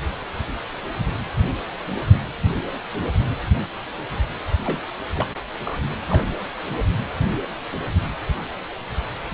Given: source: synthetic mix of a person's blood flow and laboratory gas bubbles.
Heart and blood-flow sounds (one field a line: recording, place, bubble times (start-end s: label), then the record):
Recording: Doppler ultrasound of blood flow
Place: precordium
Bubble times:
4.64-4.80 s: bubbles
5.17-5.25 s: bubbles
5.65-5.79 s: bubbles
6.02-6.06 s: bubbles
6.08-6.35 s: bubbles
From the record:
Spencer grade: 2 (many but less than half of the cardiac periods contain bubble signals, singularly or in groups)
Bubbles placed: anywhere in the cardiac cycle